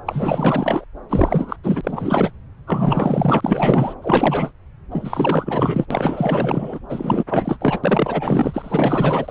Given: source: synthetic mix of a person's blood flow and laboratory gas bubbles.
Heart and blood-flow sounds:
Doppler ultrasound of blood flow; subclavian vein
0.05-0.85 s: bubbles
1.09-1.56 s: bubbles
1.64-1.81 s: bubbles
1.83-2.31 s: bubbles
2.67-3.94 s: bubbles
4.02-4.51 s: bubbles
4.91-5.85 s: bubbles
5.90-6.80 s: bubbles
6.89-7.24 s: bubbles
7.29-7.56 s: bubbles
7.60-7.80 s: bubbles
7.83-9.31 s: bubbles
From the record:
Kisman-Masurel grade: 444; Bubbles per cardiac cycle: continuous sound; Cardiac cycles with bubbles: 100%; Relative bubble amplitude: maximal (0.775 to 0.999); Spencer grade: 4 (maximum detectable bubble signal sounding continuously throughout systole and diastole of every cardiac period, and overriding the amplitude of the normal cardiac signals); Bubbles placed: anywhere in the cardiac cycle

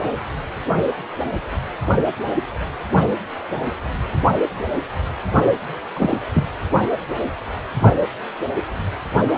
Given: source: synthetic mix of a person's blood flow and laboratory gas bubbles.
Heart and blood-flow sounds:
Doppler ultrasound of blood flow; precordium
5.96-6.18 s: bubbles
6.33-6.44 s: bubbles
From the record:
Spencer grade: 1 (occasional bubble signal discernible with the cardiac motion signal, with majority of cardiac periods free of bubbles); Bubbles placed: only in the low amplitude regions of the cardiac cycle

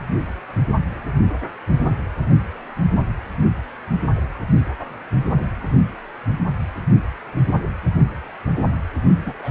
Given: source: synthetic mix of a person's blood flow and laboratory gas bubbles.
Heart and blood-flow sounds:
Doppler ultrasound of blood flow; precordium
9.17-9.35 s: bubbles
9.39-9.51 s: bubbles
From the record:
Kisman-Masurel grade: 211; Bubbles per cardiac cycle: several, 3 to 8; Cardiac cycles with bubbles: 1 to 10%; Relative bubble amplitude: barely perceptible (0.100 to 0.250); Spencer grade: 1 (occasional bubble signal discernible with the cardiac motion signal, with majority of cardiac periods free of bubbles); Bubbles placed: anywhere in the cardiac cycle

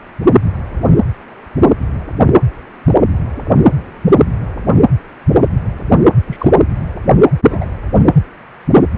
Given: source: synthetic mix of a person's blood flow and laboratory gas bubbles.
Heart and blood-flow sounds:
Doppler ultrasound of blood flow; precordium
6.27-6.49 s: bubbles
7.42-7.66 s: bubbles
From the record:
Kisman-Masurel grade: 112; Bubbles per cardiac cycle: 1 to 2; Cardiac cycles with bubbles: 1 to 10%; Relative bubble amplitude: moderate (0.250 to 0.450); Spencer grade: 1 (occasional bubble signal discernible with the cardiac motion signal, with majority of cardiac periods free of bubbles); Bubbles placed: anywhere in the cardiac cycle

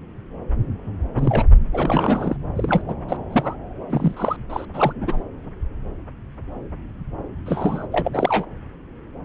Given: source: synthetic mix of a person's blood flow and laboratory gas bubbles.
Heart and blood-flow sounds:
Doppler ultrasound of blood flow; subclavian vein
1.17-1.44 s: bubbles
1.73-2.37 s: bubbles
2.56-2.82 s: bubbles
2.88-2.94 s: bubbles
3.08-3.17 s: bubbles
3.30-3.56 s: bubbles
3.90-4.36 s: bubbles
4.49-4.65 s: bubbles
4.73-5.23 s: bubbles
7.46-7.87 s: bubbles
7.92-8.46 s: bubbles
From the record:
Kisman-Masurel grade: 232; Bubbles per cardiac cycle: several, 3 to 8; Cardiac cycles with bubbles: 50 to 99%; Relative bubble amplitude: moderate (0.250 to 0.450); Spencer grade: 3 (all of the cardiac periods contain showers or single bubble signals, but not dominating or overriding the cardiac motion signals); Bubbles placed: anywhere in the cardiac cycle

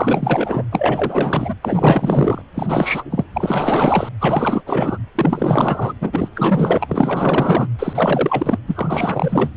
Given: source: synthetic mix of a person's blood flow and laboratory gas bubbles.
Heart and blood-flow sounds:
Doppler ultrasound of blood flow; precordium
0.00-0.65 s: bubbles
0.72-1.55 s: bubbles
1.62-2.42 s: bubbles
2.54-3.04 s: bubbles
3.10-3.25 s: bubbles
3.33-4.09 s: bubbles
4.20-4.62 s: bubbles
4.66-4.98 s: bubbles
5.15-5.93 s: bubbles
6.01-6.29 s: bubbles
6.35-7.68 s: bubbles
7.79-8.59 s: bubbles
8.67-9.51 s: bubbles
From the record:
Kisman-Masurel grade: 444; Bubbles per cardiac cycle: continuous sound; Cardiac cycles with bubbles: 100%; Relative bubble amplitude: maximal (0.775 to 0.999); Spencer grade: 4 (maximum detectable bubble signal sounding continuously throughout systole and diastole of every cardiac period, and overriding the amplitude of the normal cardiac signals); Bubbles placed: anywhere in the cardiac cycle

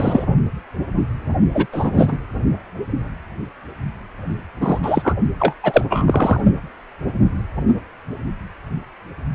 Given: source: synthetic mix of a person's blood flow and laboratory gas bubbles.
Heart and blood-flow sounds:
Doppler ultrasound of blood flow; precordium
0.00-0.26 s: bubbles
1.54-1.67 s: bubbles
1.73-2.17 s: bubbles
4.60-4.79 s: bubbles
4.82-5.13 s: bubbles
5.39-5.54 s: bubbles
5.63-5.85 s: bubbles
5.89-6.40 s: bubbles
From the record:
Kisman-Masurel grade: 223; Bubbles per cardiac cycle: several, 3 to 8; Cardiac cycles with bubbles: 10 to 50%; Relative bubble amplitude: loud (0.450 to 0.775); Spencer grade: 2 (many but less than half of the cardiac periods contain bubble signals, singularly or in groups); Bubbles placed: only in the low amplitude regions of the cardiac cycle

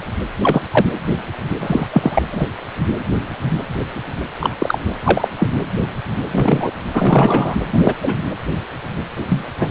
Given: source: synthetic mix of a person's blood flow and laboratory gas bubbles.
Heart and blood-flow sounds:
Doppler ultrasound of blood flow; precordium
0.42-0.65 s: bubbles
0.71-0.85 s: bubbles
1.59-1.87 s: bubbles
1.93-2.22 s: bubbles
2.31-2.46 s: bubbles
4.41-4.50 s: bubbles
4.59-4.79 s: bubbles
4.88-4.92 s: bubbles
5.04-5.28 s: bubbles
5.40-5.48 s: bubbles
6.31-6.71 s: bubbles
6.94-7.56 s: bubbles
7.73-7.94 s: bubbles
8.02-8.25 s: bubbles
9.29-9.46 s: bubbles
9.60-9.69 s: bubbles
From the record:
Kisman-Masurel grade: 233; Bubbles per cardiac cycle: several, 3 to 8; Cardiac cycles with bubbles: 50 to 99%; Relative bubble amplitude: loud (0.450 to 0.775); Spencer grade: 3 (all of the cardiac periods contain showers or single bubble signals, but not dominating or overriding the cardiac motion signals); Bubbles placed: anywhere in the cardiac cycle

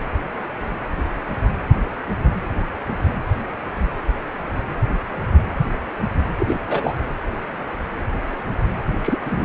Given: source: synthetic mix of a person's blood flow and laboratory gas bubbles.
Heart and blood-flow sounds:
Doppler ultrasound of blood flow; precordium
6.38-6.60 s: bubbles
6.66-6.93 s: bubbles
9.03-9.18 s: bubbles
9.24-9.45 s: bubbles
From the record:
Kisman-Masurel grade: 212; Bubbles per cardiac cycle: several, 3 to 8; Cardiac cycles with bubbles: 1 to 10%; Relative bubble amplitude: moderate (0.250 to 0.450); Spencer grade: 1 (occasional bubble signal discernible with the cardiac motion signal, with majority of cardiac periods free of bubbles); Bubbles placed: anywhere in the cardiac cycle

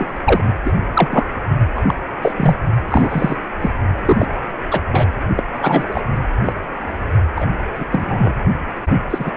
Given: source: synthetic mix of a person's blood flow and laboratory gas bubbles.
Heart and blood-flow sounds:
Doppler ultrasound of blood flow; precordium
0.00-0.12 s: bubbles
0.25-0.52 s: bubbles
0.65-0.73 s: bubbles
0.94-1.24 s: bubbles
1.75-1.83 s: bubbles
1.88-1.94 s: bubbles
2.22-2.33 s: bubbles
2.37-2.54 s: bubbles
2.90-3.41 s: bubbles
3.61-3.71 s: bubbles
4.05-4.28 s: bubbles
4.71-4.81 s: bubbles
4.92-5.08 s: bubbles
5.37-5.43 s: bubbles
5.59-5.88 s: bubbles
5.92-6.01 s: bubbles
6.45-6.53 s: bubbles
7.35-7.47 s: bubbles
7.76-7.85 s: bubbles
7.92-8.34 s: bubbles
9.10-9.31 s: bubbles
From the record:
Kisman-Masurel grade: 243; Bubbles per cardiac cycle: several, 3 to 8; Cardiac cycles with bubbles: 100%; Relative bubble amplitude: loud (0.450 to 0.775); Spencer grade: 3 (all of the cardiac periods contain showers or single bubble signals, but not dominating or overriding the cardiac motion signals); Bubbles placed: only in the low amplitude regions of the cardiac cycle

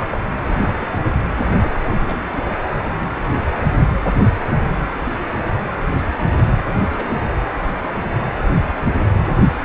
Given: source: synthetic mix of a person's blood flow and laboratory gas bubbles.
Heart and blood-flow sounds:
Doppler ultrasound of blood flow; precordium
0.00-0.07 s: bubbles
0.09-0.17 s: bubbles
0.46-0.63 s: bubbles
0.80-1.12 s: bubbles
1.61-1.72 s: bubbles
1.85-2.00 s: bubbles
2.05-2.18 s: bubbles
2.32-2.44 s: bubbles
3.03-3.16 s: bubbles
6.65-6.73 s: bubbles
6.79-7.19 s: bubbles
From the record:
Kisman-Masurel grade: 221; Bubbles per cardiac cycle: several, 3 to 8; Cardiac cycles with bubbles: 10 to 50%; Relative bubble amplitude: barely perceptible (0.100 to 0.250); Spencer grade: 2 (many but less than half of the cardiac periods contain bubble signals, singularly or in groups); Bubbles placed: anywhere in the cardiac cycle

